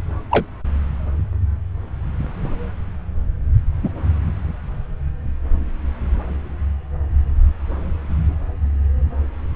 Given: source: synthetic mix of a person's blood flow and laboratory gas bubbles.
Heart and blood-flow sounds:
Doppler ultrasound of blood flow; subclavian vein
0.30-0.46 s: bubbles
3.83-3.89 s: bubbles
From the record:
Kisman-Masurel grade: 123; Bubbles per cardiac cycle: 1 to 2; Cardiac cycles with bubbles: 10 to 50%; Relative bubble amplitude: loud (0.450 to 0.775); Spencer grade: 2 (many but less than half of the cardiac periods contain bubble signals, singularly or in groups); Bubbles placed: anywhere in the cardiac cycle

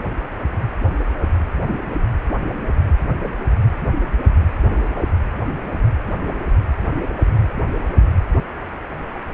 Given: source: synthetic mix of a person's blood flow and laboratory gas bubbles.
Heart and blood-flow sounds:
Doppler ultrasound of blood flow; precordium
no bubbles
From the record:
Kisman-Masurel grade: 000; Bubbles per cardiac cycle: 0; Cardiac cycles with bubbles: 0%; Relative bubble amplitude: no bubbles discernible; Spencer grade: 0 (complete lack of bubble signals)

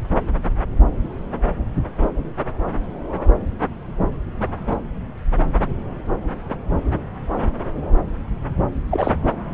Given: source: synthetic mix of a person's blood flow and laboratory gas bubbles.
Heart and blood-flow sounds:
Doppler ultrasound of blood flow; subclavian vein
8.90-9.12 s: bubbles
From the record:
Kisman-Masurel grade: 212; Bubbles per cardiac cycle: several, 3 to 8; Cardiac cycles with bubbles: 1 to 10%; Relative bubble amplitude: moderate (0.250 to 0.450); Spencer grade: 1 (occasional bubble signal discernible with the cardiac motion signal, with majority of cardiac periods free of bubbles); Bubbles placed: anywhere in the cardiac cycle

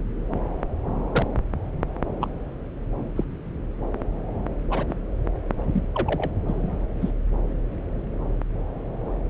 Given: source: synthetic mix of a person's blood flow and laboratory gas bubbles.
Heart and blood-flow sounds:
Doppler ultrasound of blood flow; subclavian vein
1.11-1.25 s: bubbles
2.21-2.28 s: bubbles
3.16-3.25 s: bubbles
4.70-4.86 s: bubbles
4.89-4.94 s: bubbles
5.74-5.83 s: bubbles
5.95-6.32 s: bubbles
6.49-6.86 s: bubbles
7.02-7.12 s: bubbles
From the record:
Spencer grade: 2 (many but less than half of the cardiac periods contain bubble signals, singularly or in groups); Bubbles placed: anywhere in the cardiac cycle

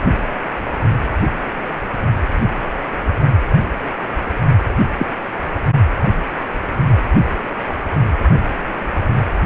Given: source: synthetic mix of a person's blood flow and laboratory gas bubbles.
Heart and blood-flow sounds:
Doppler ultrasound of blood flow; precordium
4.98-5.06 s: bubbles
From the record:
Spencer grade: 2 (many but less than half of the cardiac periods contain bubble signals, singularly or in groups); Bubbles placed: only in the low amplitude regions of the cardiac cycle

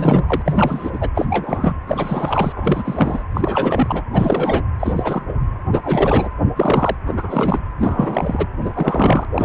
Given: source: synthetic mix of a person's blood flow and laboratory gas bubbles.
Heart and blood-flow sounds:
Doppler ultrasound of blood flow; precordium
0.00-0.42 s: bubbles
0.46-1.09 s: bubbles
1.15-1.25 s: bubbles
1.29-1.76 s: bubbles
1.87-2.52 s: bubbles
2.56-3.23 s: bubbles
3.34-4.03 s: bubbles
4.13-4.62 s: bubbles
4.79-5.22 s: bubbles
5.29-5.33 s: bubbles
5.72-5.82 s: bubbles
5.84-6.29 s: bubbles
6.41-6.49 s: bubbles
6.56-6.96 s: bubbles
7.07-7.59 s: bubbles
7.79-8.46 s: bubbles
8.61-9.25 s: bubbles
9.34-9.45 s: bubbles
From the record:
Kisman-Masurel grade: 343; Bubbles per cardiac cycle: rolling drumbeat, 9 or more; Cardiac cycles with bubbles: 100%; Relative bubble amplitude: loud (0.450 to 0.775); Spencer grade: 3 (all of the cardiac periods contain showers or single bubble signals, but not dominating or overriding the cardiac motion signals); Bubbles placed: anywhere in the cardiac cycle

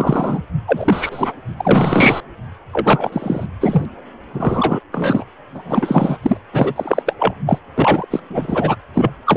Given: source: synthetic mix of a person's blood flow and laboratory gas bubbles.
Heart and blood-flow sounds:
Doppler ultrasound of blood flow; precordium
0.00-0.43 s: bubbles
0.66-1.32 s: bubbles
1.57-2.21 s: bubbles
2.72-3.46 s: bubbles
3.60-3.85 s: bubbles
4.33-4.80 s: bubbles
4.92-5.25 s: bubbles
5.54-6.17 s: bubbles
6.22-6.38 s: bubbles
6.53-6.73 s: bubbles
6.76-7.02 s: bubbles
7.06-7.14 s: bubbles
7.19-7.34 s: bubbles
7.46-7.58 s: bubbles
7.75-8.06 s: bubbles
8.11-8.20 s: bubbles
8.29-8.76 s: bubbles
8.94-9.12 s: bubbles
9.25-9.36 s: bubbles
From the record:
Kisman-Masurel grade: 343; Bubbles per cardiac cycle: rolling drumbeat, 9 or more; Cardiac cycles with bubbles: 100%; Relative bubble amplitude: loud (0.450 to 0.775); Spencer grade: 3 (all of the cardiac periods contain showers or single bubble signals, but not dominating or overriding the cardiac motion signals); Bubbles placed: anywhere in the cardiac cycle

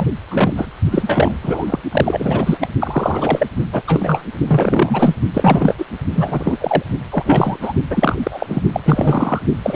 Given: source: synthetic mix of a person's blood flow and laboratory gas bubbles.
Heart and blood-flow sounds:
Doppler ultrasound of blood flow; precordium
0.00-0.05 s: bubbles
0.31-0.72 s: bubbles
0.91-1.38 s: bubbles
1.42-1.79 s: bubbles
1.92-2.58 s: bubbles
2.61-2.68 s: bubbles
2.80-3.48 s: bubbles
3.73-3.83 s: bubbles
3.87-4.22 s: bubbles
4.46-5.17 s: bubbles
5.33-5.75 s: bubbles
5.77-5.85 s: bubbles
6.15-6.58 s: bubbles
6.60-6.83 s: bubbles
7.10-7.59 s: bubbles
7.61-7.73 s: bubbles
7.90-8.16 s: bubbles
8.23-8.63 s: bubbles
8.72-8.80 s: bubbles
8.85-9.40 s: bubbles
9.63-9.76 s: bubbles
From the record:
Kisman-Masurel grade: 343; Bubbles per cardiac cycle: rolling drumbeat, 9 or more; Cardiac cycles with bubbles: 100%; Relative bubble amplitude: loud (0.450 to 0.775); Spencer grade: 3 (all of the cardiac periods contain showers or single bubble signals, but not dominating or overriding the cardiac motion signals); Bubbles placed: only in the low amplitude regions of the cardiac cycle

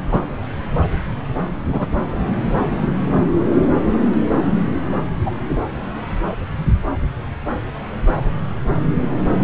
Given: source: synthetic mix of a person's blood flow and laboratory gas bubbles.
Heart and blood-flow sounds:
Doppler ultrasound of blood flow; subclavian vein
0.11-0.20 s: bubbles
1.71-1.86 s: bubbles
5.25-5.31 s: bubbles
From the record:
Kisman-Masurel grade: 123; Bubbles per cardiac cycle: 1 to 2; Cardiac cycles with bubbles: 10 to 50%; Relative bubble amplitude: loud (0.450 to 0.775); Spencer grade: 2 (many but less than half of the cardiac periods contain bubble signals, singularly or in groups); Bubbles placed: anywhere in the cardiac cycle

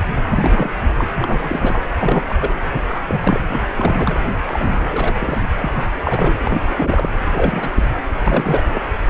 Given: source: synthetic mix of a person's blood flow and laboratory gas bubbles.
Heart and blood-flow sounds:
Doppler ultrasound of blood flow; precordium
0.30-0.69 s: bubbles
0.97-1.08 s: bubbles
1.15-1.81 s: bubbles
2.00-2.35 s: bubbles
2.38-2.58 s: bubbles
2.72-3.42 s: bubbles
3.50-3.61 s: bubbles
3.76-4.20 s: bubbles
4.47-5.16 s: bubbles
5.19-5.43 s: bubbles
5.57-5.84 s: bubbles
6.04-6.41 s: bubbles
6.45-7.25 s: bubbles
7.31-7.88 s: bubbles
8.19-8.80 s: bubbles
From the record:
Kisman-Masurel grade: 342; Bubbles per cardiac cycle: rolling drumbeat, 9 or more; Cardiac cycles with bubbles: 100%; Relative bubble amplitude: moderate (0.250 to 0.450); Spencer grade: 3 (all of the cardiac periods contain showers or single bubble signals, but not dominating or overriding the cardiac motion signals); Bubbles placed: anywhere in the cardiac cycle

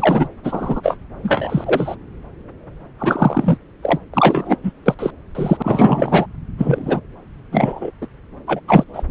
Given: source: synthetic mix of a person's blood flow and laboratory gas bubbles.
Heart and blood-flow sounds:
Doppler ultrasound of blood flow; subclavian vein
0.00-0.28 s: bubbles
0.43-0.81 s: bubbles
0.83-0.97 s: bubbles
1.23-1.96 s: bubbles
2.99-3.58 s: bubbles
3.83-3.99 s: bubbles
4.13-4.56 s: bubbles
4.63-4.72 s: bubbles
4.86-4.95 s: bubbles
4.99-5.11 s: bubbles
5.35-6.26 s: bubbles
6.58-7.00 s: bubbles
7.51-7.91 s: bubbles
8.01-8.06 s: bubbles
8.47-8.60 s: bubbles
8.68-8.84 s: bubbles
8.94-9.03 s: bubbles
From the record:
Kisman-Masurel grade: 233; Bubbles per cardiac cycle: several, 3 to 8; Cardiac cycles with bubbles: 50 to 99%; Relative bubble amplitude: loud (0.450 to 0.775); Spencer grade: 3 (all of the cardiac periods contain showers or single bubble signals, but not dominating or overriding the cardiac motion signals); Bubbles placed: anywhere in the cardiac cycle

